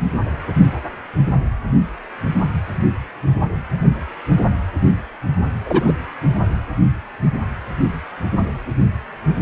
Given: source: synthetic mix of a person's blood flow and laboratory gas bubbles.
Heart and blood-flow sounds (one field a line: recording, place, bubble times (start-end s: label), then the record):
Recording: Doppler ultrasound of blood flow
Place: precordium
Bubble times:
5.66-5.92 s: bubbles
From the record:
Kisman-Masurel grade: 113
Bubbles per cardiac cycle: 1 to 2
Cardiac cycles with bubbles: 1 to 10%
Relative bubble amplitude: loud (0.450 to 0.775)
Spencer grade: 1 (occasional bubble signal discernible with the cardiac motion signal, with majority of cardiac periods free of bubbles)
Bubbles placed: only in the low amplitude regions of the cardiac cycle